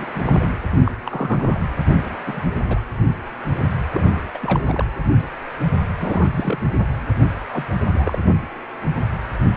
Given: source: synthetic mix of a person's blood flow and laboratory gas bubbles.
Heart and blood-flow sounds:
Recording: Doppler ultrasound of blood flow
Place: precordium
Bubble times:
0.00-0.07 s: bubbles
0.14-0.51 s: bubbles
0.84-0.91 s: bubbles
1.06-1.60 s: bubbles
1.88-2.16 s: bubbles
2.26-2.46 s: bubbles
2.62-2.79 s: bubbles
3.93-4.29 s: bubbles
4.33-4.38 s: bubbles
4.41-4.85 s: bubbles
5.97-6.62 s: bubbles
6.77-6.85 s: bubbles
7.52-7.65 s: bubbles
7.94-8.19 s: bubbles
From the record:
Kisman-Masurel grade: 221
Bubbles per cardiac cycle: several, 3 to 8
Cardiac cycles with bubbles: 10 to 50%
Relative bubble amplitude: barely perceptible (0.100 to 0.250)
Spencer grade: 2 (many but less than half of the cardiac periods contain bubble signals, singularly or in groups)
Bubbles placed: anywhere in the cardiac cycle

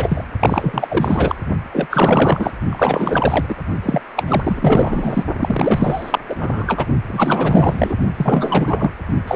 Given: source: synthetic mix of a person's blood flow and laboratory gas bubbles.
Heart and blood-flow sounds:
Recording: Doppler ultrasound of blood flow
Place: precordium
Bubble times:
0.00-0.24 s: bubbles
0.40-1.35 s: bubbles
1.72-1.87 s: bubbles
1.90-2.51 s: bubbles
2.70-3.55 s: bubbles
3.82-4.01 s: bubbles
4.16-4.23 s: bubbles
4.26-5.25 s: bubbles
5.39-6.19 s: bubbles
6.29-6.86 s: bubbles
7.07-7.96 s: bubbles
8.16-8.91 s: bubbles
9.27-9.36 s: bubbles
From the record:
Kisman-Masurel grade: 444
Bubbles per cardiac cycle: continuous sound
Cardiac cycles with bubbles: 100%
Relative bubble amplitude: maximal (0.775 to 0.999)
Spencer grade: 4 (maximum detectable bubble signal sounding continuously throughout systole and diastole of every cardiac period, and overriding the amplitude of the normal cardiac signals)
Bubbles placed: only in the low amplitude regions of the cardiac cycle

